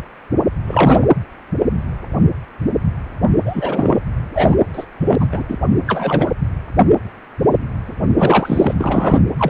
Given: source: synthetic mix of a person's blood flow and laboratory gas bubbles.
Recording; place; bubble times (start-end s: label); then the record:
Doppler ultrasound of blood flow; precordium
0.66-1.07 s: bubbles
3.45-3.98 s: bubbles
4.34-4.55 s: bubbles
4.72-4.86 s: bubbles
5.01-5.15 s: bubbles
5.20-5.26 s: bubbles
5.31-5.42 s: bubbles
5.47-5.58 s: bubbles
5.86-6.31 s: bubbles
8.18-8.75 s: bubbles
8.79-9.21 s: bubbles
9.38-9.50 s: bubbles
From the record:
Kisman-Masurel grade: 223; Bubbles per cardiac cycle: several, 3 to 8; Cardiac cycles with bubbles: 10 to 50%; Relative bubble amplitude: loud (0.450 to 0.775); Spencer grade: 2 (many but less than half of the cardiac periods contain bubble signals, singularly or in groups); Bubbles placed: anywhere in the cardiac cycle